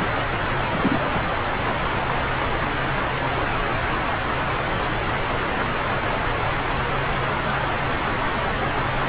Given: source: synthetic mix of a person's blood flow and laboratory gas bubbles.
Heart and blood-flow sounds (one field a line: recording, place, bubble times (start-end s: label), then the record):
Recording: Doppler ultrasound of blood flow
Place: subclavian vein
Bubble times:
0.00-0.09 s: bubbles
0.72-1.24 s: bubbles
From the record:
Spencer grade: 1 (occasional bubble signal discernible with the cardiac motion signal, with majority of cardiac periods free of bubbles)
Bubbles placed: anywhere in the cardiac cycle